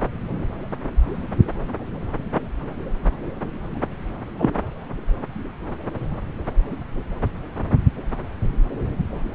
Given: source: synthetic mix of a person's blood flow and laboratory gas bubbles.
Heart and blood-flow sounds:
Doppler ultrasound of blood flow; subclavian vein
4.38-4.53 s: bubbles
From the record:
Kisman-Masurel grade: 113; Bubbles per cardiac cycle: 1 to 2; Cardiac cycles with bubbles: 1 to 10%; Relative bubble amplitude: loud (0.450 to 0.775); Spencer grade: 1 (occasional bubble signal discernible with the cardiac motion signal, with majority of cardiac periods free of bubbles); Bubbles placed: anywhere in the cardiac cycle

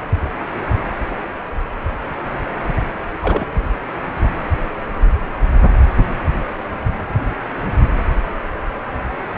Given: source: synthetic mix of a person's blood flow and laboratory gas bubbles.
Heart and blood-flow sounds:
Doppler ultrasound of blood flow; precordium
3.22-3.63 s: bubbles
From the record:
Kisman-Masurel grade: 212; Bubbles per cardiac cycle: several, 3 to 8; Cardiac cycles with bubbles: 1 to 10%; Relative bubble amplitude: moderate (0.250 to 0.450); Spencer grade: 1 (occasional bubble signal discernible with the cardiac motion signal, with majority of cardiac periods free of bubbles); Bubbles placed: anywhere in the cardiac cycle

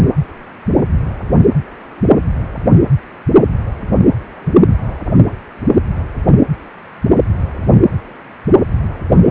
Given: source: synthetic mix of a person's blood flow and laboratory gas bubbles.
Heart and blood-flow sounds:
Doppler ultrasound of blood flow; precordium
0.00-0.04 s: bubbles
From the record:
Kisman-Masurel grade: 211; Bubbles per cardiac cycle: several, 3 to 8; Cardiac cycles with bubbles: 1 to 10%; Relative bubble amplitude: barely perceptible (0.100 to 0.250); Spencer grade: 1 (occasional bubble signal discernible with the cardiac motion signal, with majority of cardiac periods free of bubbles); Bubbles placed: anywhere in the cardiac cycle

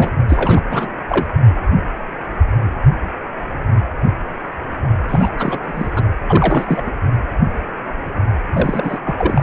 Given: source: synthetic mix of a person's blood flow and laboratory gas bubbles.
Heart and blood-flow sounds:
Doppler ultrasound of blood flow; precordium
0.00-0.11 s: bubbles
0.28-0.61 s: bubbles
0.69-0.89 s: bubbles
1.08-1.26 s: bubbles
5.08-5.31 s: bubbles
5.38-5.59 s: bubbles
5.62-5.91 s: bubbles
5.96-6.03 s: bubbles
6.28-6.91 s: bubbles
8.53-8.99 s: bubbles
9.04-9.43 s: bubbles
From the record:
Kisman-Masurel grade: 332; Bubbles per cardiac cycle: rolling drumbeat, 9 or more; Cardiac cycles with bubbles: 50 to 99%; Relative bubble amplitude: moderate (0.250 to 0.450); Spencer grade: 3 (all of the cardiac periods contain showers or single bubble signals, but not dominating or overriding the cardiac motion signals); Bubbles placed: anywhere in the cardiac cycle

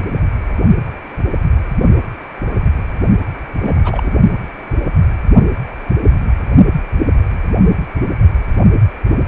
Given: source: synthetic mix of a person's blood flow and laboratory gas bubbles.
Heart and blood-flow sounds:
Doppler ultrasound of blood flow; precordium
3.60-4.12 s: bubbles
From the record:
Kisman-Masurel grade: 212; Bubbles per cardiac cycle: several, 3 to 8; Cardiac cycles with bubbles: 1 to 10%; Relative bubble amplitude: moderate (0.250 to 0.450); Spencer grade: 1 (occasional bubble signal discernible with the cardiac motion signal, with majority of cardiac periods free of bubbles); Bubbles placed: only in the low amplitude regions of the cardiac cycle

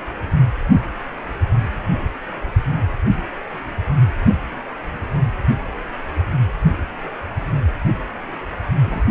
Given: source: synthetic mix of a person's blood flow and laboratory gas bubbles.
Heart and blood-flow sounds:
Doppler ultrasound of blood flow; precordium
8.85-9.01 s: bubbles
From the record:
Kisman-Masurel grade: 211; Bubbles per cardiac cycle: several, 3 to 8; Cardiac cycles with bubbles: 1 to 10%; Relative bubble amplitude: barely perceptible (0.100 to 0.250); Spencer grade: 1 (occasional bubble signal discernible with the cardiac motion signal, with majority of cardiac periods free of bubbles); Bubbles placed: anywhere in the cardiac cycle

